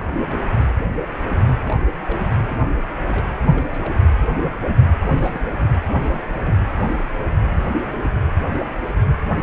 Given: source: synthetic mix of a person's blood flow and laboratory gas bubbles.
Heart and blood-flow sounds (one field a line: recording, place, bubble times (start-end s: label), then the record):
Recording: Doppler ultrasound of blood flow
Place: precordium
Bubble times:
0.00-0.06 s: bubbles
0.27-0.38 s: bubbles
1.61-1.80 s: bubbles
2.00-2.22 s: bubbles
2.50-2.75 s: bubbles
2.78-2.83 s: bubbles
3.12-3.31 s: bubbles
3.46-3.67 s: bubbles
3.71-3.94 s: bubbles
5.00-5.70 s: bubbles
6.02-6.57 s: bubbles
From the record:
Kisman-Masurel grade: 221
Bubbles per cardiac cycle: several, 3 to 8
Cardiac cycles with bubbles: 10 to 50%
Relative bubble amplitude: barely perceptible (0.100 to 0.250)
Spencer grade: 2 (many but less than half of the cardiac periods contain bubble signals, singularly or in groups)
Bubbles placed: anywhere in the cardiac cycle